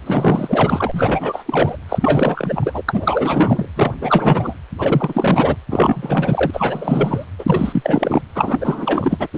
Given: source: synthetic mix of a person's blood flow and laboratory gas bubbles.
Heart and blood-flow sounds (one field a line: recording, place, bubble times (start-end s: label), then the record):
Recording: Doppler ultrasound of blood flow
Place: precordium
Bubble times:
0.06-1.77 s: bubbles
1.89-2.83 s: bubbles
2.88-3.69 s: bubbles
3.76-3.92 s: bubbles
4.01-4.54 s: bubbles
4.79-5.55 s: bubbles
5.70-6.51 s: bubbles
6.53-7.26 s: bubbles
7.38-8.22 s: bubbles
8.34-9.27 s: bubbles
9.34-9.38 s: bubbles
From the record:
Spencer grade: 4 (maximum detectable bubble signal sounding continuously throughout systole and diastole of every cardiac period, and overriding the amplitude of the normal cardiac signals)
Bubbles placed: anywhere in the cardiac cycle